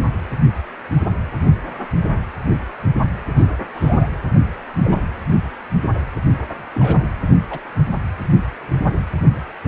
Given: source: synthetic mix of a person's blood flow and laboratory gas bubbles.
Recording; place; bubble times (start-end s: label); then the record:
Doppler ultrasound of blood flow; precordium
3.36-3.46 s: bubbles
3.73-4.08 s: bubbles
4.83-5.06 s: bubbles
6.75-7.03 s: bubbles
7.50-7.60 s: bubbles
From the record:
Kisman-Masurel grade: 122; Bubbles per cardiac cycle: 1 to 2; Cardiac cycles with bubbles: 10 to 50%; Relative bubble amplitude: moderate (0.250 to 0.450); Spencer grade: 2 (many but less than half of the cardiac periods contain bubble signals, singularly or in groups); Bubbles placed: anywhere in the cardiac cycle